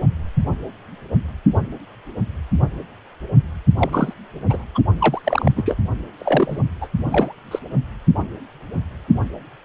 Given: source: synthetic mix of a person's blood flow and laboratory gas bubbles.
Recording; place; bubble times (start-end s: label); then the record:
Doppler ultrasound of blood flow; precordium
3.77-4.13 s: bubbles
4.50-4.67 s: bubbles
4.75-4.81 s: bubbles
4.99-5.21 s: bubbles
5.24-5.52 s: bubbles
5.56-5.76 s: bubbles
6.18-6.58 s: bubbles
6.81-6.88 s: bubbles
7.10-7.33 s: bubbles
7.51-7.59 s: bubbles
From the record:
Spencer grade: 3 (all of the cardiac periods contain showers or single bubble signals, but not dominating or overriding the cardiac motion signals); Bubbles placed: only in the low amplitude regions of the cardiac cycle